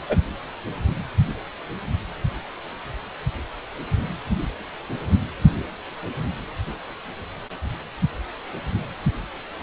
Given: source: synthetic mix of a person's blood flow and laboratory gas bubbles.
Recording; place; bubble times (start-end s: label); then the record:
Doppler ultrasound of blood flow; precordium
0.09-0.17 s: bubbles
From the record:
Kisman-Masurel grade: 122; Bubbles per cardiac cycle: 1 to 2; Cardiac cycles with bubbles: 10 to 50%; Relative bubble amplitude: moderate (0.250 to 0.450); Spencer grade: 2 (many but less than half of the cardiac periods contain bubble signals, singularly or in groups); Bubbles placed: anywhere in the cardiac cycle